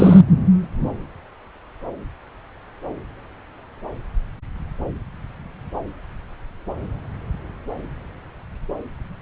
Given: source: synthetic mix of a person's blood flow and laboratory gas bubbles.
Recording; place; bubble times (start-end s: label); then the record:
Doppler ultrasound of blood flow; subclavian vein
0.00-0.21 s: bubbles
From the record:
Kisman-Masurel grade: 213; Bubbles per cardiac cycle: several, 3 to 8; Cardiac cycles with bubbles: 1 to 10%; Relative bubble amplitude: loud (0.450 to 0.775); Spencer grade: 1 (occasional bubble signal discernible with the cardiac motion signal, with majority of cardiac periods free of bubbles); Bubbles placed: anywhere in the cardiac cycle